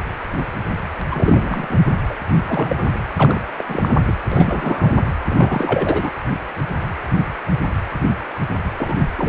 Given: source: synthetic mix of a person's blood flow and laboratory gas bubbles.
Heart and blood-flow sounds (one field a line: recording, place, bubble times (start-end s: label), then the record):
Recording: Doppler ultrasound of blood flow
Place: precordium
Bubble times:
1.10-1.79 s: bubbles
2.09-2.16 s: bubbles
2.44-2.92 s: bubbles
3.17-3.41 s: bubbles
3.58-3.97 s: bubbles
4.07-4.14 s: bubbles
4.31-5.06 s: bubbles
5.24-6.11 s: bubbles
8.78-9.11 s: bubbles
9.17-9.29 s: bubbles
From the record:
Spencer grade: 3 (all of the cardiac periods contain showers or single bubble signals, but not dominating or overriding the cardiac motion signals)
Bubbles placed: anywhere in the cardiac cycle